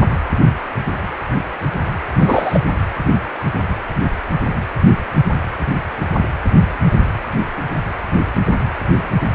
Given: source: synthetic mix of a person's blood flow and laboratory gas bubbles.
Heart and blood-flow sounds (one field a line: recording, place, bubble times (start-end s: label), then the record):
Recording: Doppler ultrasound of blood flow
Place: precordium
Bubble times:
2.19-2.61 s: bubbles
From the record:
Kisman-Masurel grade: 213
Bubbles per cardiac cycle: several, 3 to 8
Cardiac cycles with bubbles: 1 to 10%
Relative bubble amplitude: loud (0.450 to 0.775)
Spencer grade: 1 (occasional bubble signal discernible with the cardiac motion signal, with majority of cardiac periods free of bubbles)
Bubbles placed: anywhere in the cardiac cycle